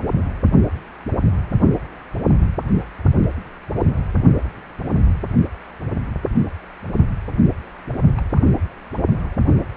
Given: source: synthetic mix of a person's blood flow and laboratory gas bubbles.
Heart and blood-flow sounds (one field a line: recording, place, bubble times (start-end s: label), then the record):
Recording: Doppler ultrasound of blood flow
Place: precordium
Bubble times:
3.75-3.89 s: bubbles
8.18-8.22 s: bubbles
8.35-8.40 s: bubbles
9.62-9.66 s: bubbles
From the record:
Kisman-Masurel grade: 121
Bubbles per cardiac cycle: 1 to 2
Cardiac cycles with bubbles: 10 to 50%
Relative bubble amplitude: barely perceptible (0.100 to 0.250)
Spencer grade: 2 (many but less than half of the cardiac periods contain bubble signals, singularly or in groups)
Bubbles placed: only in the low amplitude regions of the cardiac cycle